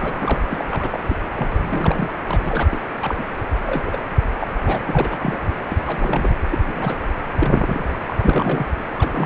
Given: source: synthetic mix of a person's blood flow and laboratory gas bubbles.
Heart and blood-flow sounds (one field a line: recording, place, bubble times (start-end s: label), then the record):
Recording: Doppler ultrasound of blood flow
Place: precordium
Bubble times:
0.00-0.41 s: bubbles
0.48-0.64 s: bubbles
0.70-0.99 s: bubbles
1.09-1.16 s: bubbles
1.35-1.48 s: bubbles
1.71-2.12 s: bubbles
2.25-2.69 s: bubbles
2.72-2.79 s: bubbles
3.00-3.23 s: bubbles
3.66-3.98 s: bubbles
4.40-4.47 s: bubbles
4.65-4.80 s: bubbles
4.85-5.39 s: bubbles
5.71-5.76 s: bubbles
5.86-6.29 s: bubbles
6.49-6.58 s: bubbles
6.67-6.98 s: bubbles
7.34-7.84 s: bubbles
8.07-8.16 s: bubbles
8.19-8.66 s: bubbles
8.98-9.26 s: bubbles
From the record:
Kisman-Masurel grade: 242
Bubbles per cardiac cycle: several, 3 to 8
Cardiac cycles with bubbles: 100%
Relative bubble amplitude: moderate (0.250 to 0.450)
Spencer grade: 3 (all of the cardiac periods contain showers or single bubble signals, but not dominating or overriding the cardiac motion signals)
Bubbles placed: anywhere in the cardiac cycle